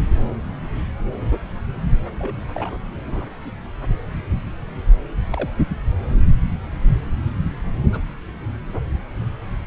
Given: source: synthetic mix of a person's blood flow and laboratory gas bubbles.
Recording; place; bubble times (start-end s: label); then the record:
Doppler ultrasound of blood flow; subclavian vein
1.93-2.00 s: bubbles
2.18-2.36 s: bubbles
2.54-2.79 s: bubbles
3.06-3.29 s: bubbles
3.42-3.51 s: bubbles
5.32-5.49 s: bubbles
7.92-8.01 s: bubbles
From the record:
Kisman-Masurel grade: 121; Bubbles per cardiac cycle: 1 to 2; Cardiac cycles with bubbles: 10 to 50%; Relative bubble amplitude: barely perceptible (0.100 to 0.250); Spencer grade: 2 (many but less than half of the cardiac periods contain bubble signals, singularly or in groups); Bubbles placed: anywhere in the cardiac cycle